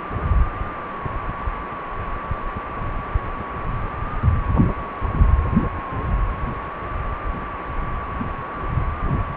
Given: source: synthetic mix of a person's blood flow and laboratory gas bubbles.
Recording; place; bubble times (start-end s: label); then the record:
Doppler ultrasound of blood flow; precordium
no bubbles
From the record:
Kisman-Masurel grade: 000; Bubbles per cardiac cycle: 0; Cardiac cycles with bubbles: 0%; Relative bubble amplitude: no bubbles discernible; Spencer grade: 0 (complete lack of bubble signals)